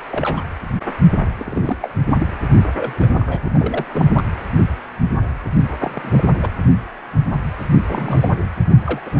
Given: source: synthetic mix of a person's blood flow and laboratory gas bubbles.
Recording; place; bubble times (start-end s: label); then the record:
Doppler ultrasound of blood flow; precordium
0.11-0.42 s: bubbles
1.20-1.25 s: bubbles
1.38-1.77 s: bubbles
1.82-1.90 s: bubbles
2.09-2.25 s: bubbles
2.73-3.07 s: bubbles
3.15-3.40 s: bubbles
3.44-3.50 s: bubbles
3.54-3.85 s: bubbles
3.92-4.23 s: bubbles
5.80-5.91 s: bubbles
5.93-6.24 s: bubbles
6.41-6.49 s: bubbles
7.88-8.30 s: bubbles
8.84-9.00 s: bubbles
9.06-9.20 s: bubbles
From the record:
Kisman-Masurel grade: 232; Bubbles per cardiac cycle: several, 3 to 8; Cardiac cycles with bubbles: 50 to 99%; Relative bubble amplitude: moderate (0.250 to 0.450); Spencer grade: 3 (all of the cardiac periods contain showers or single bubble signals, but not dominating or overriding the cardiac motion signals); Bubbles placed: anywhere in the cardiac cycle